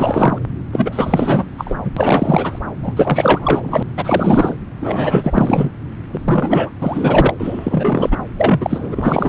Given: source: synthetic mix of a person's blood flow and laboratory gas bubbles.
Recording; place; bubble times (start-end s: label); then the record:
Doppler ultrasound of blood flow; subclavian vein
0.00-0.39 s: bubbles
0.72-1.45 s: bubbles
1.57-1.78 s: bubbles
1.84-1.91 s: bubbles
1.97-2.59 s: bubbles
2.83-3.83 s: bubbles
3.97-4.55 s: bubbles
4.80-5.69 s: bubbles
6.08-6.70 s: bubbles
6.80-7.33 s: bubbles
7.39-8.17 s: bubbles
8.38-9.29 s: bubbles
From the record:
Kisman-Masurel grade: 444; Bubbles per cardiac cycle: continuous sound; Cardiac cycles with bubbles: 100%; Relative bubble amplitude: maximal (0.775 to 0.999); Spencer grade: 4 (maximum detectable bubble signal sounding continuously throughout systole and diastole of every cardiac period, and overriding the amplitude of the normal cardiac signals); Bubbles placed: anywhere in the cardiac cycle